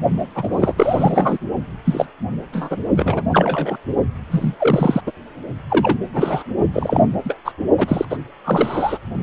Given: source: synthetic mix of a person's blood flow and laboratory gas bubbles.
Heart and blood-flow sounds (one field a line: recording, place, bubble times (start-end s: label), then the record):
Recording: Doppler ultrasound of blood flow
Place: precordium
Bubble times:
0.35-1.38 s: bubbles
1.84-2.07 s: bubbles
2.53-2.77 s: bubbles
2.96-3.22 s: bubbles
3.32-3.78 s: bubbles
4.31-4.54 s: bubbles
4.58-5.02 s: bubbles
5.07-5.12 s: bubbles
5.70-5.98 s: bubbles
6.13-6.44 s: bubbles
6.73-7.06 s: bubbles
7.25-7.38 s: bubbles
7.45-7.52 s: bubbles
7.77-8.05 s: bubbles
8.10-8.18 s: bubbles
8.44-8.98 s: bubbles
From the record:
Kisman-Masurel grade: 243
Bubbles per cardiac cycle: several, 3 to 8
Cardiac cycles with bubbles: 100%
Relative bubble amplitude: loud (0.450 to 0.775)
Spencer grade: 3 (all of the cardiac periods contain showers or single bubble signals, but not dominating or overriding the cardiac motion signals)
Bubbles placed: only in the low amplitude regions of the cardiac cycle